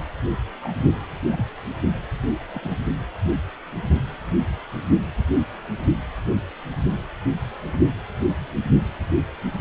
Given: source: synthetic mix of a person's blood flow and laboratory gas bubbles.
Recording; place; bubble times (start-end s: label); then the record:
Doppler ultrasound of blood flow; precordium
0.62-0.73 s: bubbles
1.32-1.46 s: bubbles
2.54-2.60 s: bubbles
2.62-2.75 s: bubbles
From the record:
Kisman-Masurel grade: 121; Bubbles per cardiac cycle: 1 to 2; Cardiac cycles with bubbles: 10 to 50%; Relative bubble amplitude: barely perceptible (0.100 to 0.250); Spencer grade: 2 (many but less than half of the cardiac periods contain bubble signals, singularly or in groups); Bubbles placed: only in the low amplitude regions of the cardiac cycle